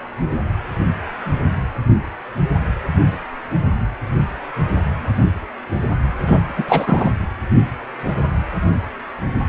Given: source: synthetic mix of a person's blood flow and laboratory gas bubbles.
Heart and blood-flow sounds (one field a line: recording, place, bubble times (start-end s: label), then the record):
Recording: Doppler ultrasound of blood flow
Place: precordium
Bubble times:
6.27-6.43 s: bubbles
6.56-6.64 s: bubbles
6.68-7.11 s: bubbles
From the record:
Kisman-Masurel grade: 213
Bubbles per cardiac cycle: several, 3 to 8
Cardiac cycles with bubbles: 1 to 10%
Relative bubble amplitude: loud (0.450 to 0.775)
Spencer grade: 1 (occasional bubble signal discernible with the cardiac motion signal, with majority of cardiac periods free of bubbles)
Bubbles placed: anywhere in the cardiac cycle